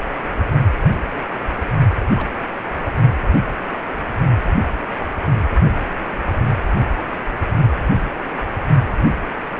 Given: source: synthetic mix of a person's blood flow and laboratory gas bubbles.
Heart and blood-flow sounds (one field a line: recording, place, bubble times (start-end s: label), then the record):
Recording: Doppler ultrasound of blood flow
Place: precordium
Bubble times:
2.17-2.30 s: bubbles
2.80-2.91 s: bubbles
From the record:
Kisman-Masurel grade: 111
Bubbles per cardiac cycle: 1 to 2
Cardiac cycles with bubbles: 1 to 10%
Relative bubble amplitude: barely perceptible (0.100 to 0.250)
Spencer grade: 1 (occasional bubble signal discernible with the cardiac motion signal, with majority of cardiac periods free of bubbles)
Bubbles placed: only in the low amplitude regions of the cardiac cycle